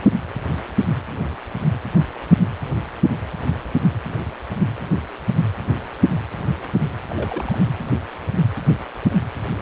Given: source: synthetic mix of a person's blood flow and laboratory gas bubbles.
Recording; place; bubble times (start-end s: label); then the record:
Doppler ultrasound of blood flow; precordium
7.09-7.58 s: bubbles
From the record:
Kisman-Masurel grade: 211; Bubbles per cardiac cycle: several, 3 to 8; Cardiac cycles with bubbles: 1 to 10%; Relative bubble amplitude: barely perceptible (0.100 to 0.250); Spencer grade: 1 (occasional bubble signal discernible with the cardiac motion signal, with majority of cardiac periods free of bubbles); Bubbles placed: anywhere in the cardiac cycle